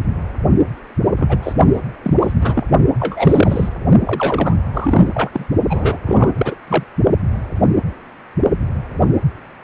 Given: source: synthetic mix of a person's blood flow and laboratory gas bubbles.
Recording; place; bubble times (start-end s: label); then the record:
Doppler ultrasound of blood flow; precordium
1.17-1.38 s: bubbles
1.43-1.53 s: bubbles
1.74-1.80 s: bubbles
2.03-2.14 s: bubbles
2.19-2.33 s: bubbles
2.41-2.64 s: bubbles
3.00-3.70 s: bubbles
4.04-4.55 s: bubbles
4.73-5.09 s: bubbles
5.14-5.29 s: bubbles
5.32-5.46 s: bubbles
5.69-5.98 s: bubbles
6.06-6.54 s: bubbles
6.67-6.83 s: bubbles
From the record:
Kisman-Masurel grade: 333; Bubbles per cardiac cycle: rolling drumbeat, 9 or more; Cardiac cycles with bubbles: 50 to 99%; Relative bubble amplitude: loud (0.450 to 0.775); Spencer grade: 3 (all of the cardiac periods contain showers or single bubble signals, but not dominating or overriding the cardiac motion signals); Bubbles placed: only in the low amplitude regions of the cardiac cycle